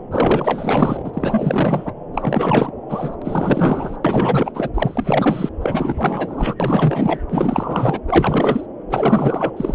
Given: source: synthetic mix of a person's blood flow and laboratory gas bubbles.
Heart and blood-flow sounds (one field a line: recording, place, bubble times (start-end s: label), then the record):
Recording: Doppler ultrasound of blood flow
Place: subclavian vein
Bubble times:
0.11-1.94 s: bubbles
2.13-2.71 s: bubbles
2.88-3.15 s: bubbles
3.21-3.96 s: bubbles
4.04-4.52 s: bubbles
4.54-4.70 s: bubbles
4.74-5.49 s: bubbles
5.61-6.55 s: bubbles
6.60-7.21 s: bubbles
7.29-8.00 s: bubbles
8.08-8.67 s: bubbles
8.90-9.75 s: bubbles
From the record:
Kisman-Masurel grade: 444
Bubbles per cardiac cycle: continuous sound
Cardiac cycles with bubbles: 100%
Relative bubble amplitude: maximal (0.775 to 0.999)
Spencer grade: 4 (maximum detectable bubble signal sounding continuously throughout systole and diastole of every cardiac period, and overriding the amplitude of the normal cardiac signals)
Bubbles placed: anywhere in the cardiac cycle